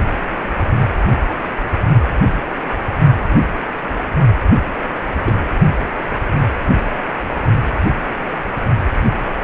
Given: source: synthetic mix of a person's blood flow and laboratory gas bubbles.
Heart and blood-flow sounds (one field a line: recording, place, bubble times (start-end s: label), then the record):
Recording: Doppler ultrasound of blood flow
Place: precordium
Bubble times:
5.26-5.31 s: bubbles
From the record:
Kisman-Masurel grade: 123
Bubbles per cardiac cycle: 1 to 2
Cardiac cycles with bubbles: 10 to 50%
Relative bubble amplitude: loud (0.450 to 0.775)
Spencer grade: 2 (many but less than half of the cardiac periods contain bubble signals, singularly or in groups)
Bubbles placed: only in the low amplitude regions of the cardiac cycle